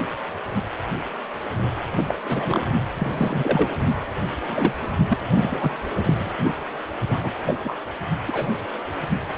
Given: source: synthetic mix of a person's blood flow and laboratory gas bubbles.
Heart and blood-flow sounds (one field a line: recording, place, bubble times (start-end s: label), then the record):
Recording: Doppler ultrasound of blood flow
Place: precordium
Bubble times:
1.91-2.18 s: bubbles
2.25-2.67 s: bubbles
2.96-3.78 s: bubbles
4.48-4.74 s: bubbles
5.08-5.18 s: bubbles
5.33-5.71 s: bubbles
6.04-6.32 s: bubbles
7.09-7.33 s: bubbles
7.46-7.54 s: bubbles
7.64-7.74 s: bubbles
8.27-8.49 s: bubbles
From the record:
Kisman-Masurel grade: 232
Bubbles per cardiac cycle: several, 3 to 8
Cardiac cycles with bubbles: 50 to 99%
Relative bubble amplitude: moderate (0.250 to 0.450)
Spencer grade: 3 (all of the cardiac periods contain showers or single bubble signals, but not dominating or overriding the cardiac motion signals)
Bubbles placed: anywhere in the cardiac cycle